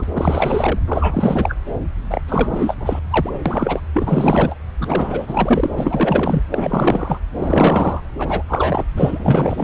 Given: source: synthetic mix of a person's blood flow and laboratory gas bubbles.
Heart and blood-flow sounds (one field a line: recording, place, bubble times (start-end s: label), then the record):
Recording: Doppler ultrasound of blood flow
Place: subclavian vein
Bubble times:
0.00-0.04 s: bubbles
0.14-0.79 s: bubbles
0.87-1.55 s: bubbles
2.10-2.21 s: bubbles
2.27-2.75 s: bubbles
2.79-3.00 s: bubbles
3.10-3.31 s: bubbles
3.46-3.80 s: bubbles
3.93-4.55 s: bubbles
4.79-5.68 s: bubbles
5.76-6.43 s: bubbles
6.50-7.18 s: bubbles
7.38-8.02 s: bubbles
8.18-8.43 s: bubbles
8.48-8.85 s: bubbles
8.96-9.64 s: bubbles
From the record:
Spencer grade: 4 (maximum detectable bubble signal sounding continuously throughout systole and diastole of every cardiac period, and overriding the amplitude of the normal cardiac signals)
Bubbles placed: anywhere in the cardiac cycle